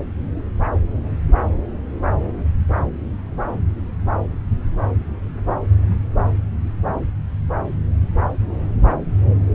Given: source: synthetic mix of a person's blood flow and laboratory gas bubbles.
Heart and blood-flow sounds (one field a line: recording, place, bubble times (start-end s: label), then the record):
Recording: Doppler ultrasound of blood flow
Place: subclavian vein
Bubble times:
no bubbles
From the record:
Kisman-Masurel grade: 000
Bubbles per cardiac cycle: 0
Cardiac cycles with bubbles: 0%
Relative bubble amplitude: no bubbles discernible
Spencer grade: 0 (complete lack of bubble signals)